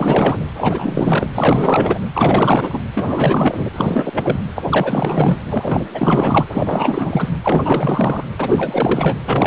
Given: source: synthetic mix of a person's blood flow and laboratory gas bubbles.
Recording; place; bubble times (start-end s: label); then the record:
Doppler ultrasound of blood flow; precordium
0.00-0.38 s: bubbles
0.58-1.28 s: bubbles
1.34-1.99 s: bubbles
2.14-2.82 s: bubbles
2.94-3.65 s: bubbles
3.75-4.40 s: bubbles
4.55-4.64 s: bubbles
4.69-5.37 s: bubbles
5.50-5.85 s: bubbles
5.93-6.44 s: bubbles
6.52-7.29 s: bubbles
7.43-8.25 s: bubbles
8.39-9.20 s: bubbles
9.27-9.47 s: bubbles
From the record:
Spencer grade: 4 (maximum detectable bubble signal sounding continuously throughout systole and diastole of every cardiac period, and overriding the amplitude of the normal cardiac signals); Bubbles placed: anywhere in the cardiac cycle